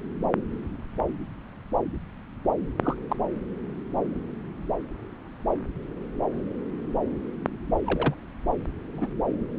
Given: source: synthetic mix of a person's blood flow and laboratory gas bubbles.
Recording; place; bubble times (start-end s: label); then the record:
Doppler ultrasound of blood flow; subclavian vein
2.81-2.96 s: bubbles
3.09-3.15 s: bubbles
7.85-8.14 s: bubbles
8.95-9.08 s: bubbles
From the record:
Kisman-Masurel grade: 121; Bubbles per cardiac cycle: 1 to 2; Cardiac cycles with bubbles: 10 to 50%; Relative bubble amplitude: barely perceptible (0.100 to 0.250); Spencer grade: 2 (many but less than half of the cardiac periods contain bubble signals, singularly or in groups); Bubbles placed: anywhere in the cardiac cycle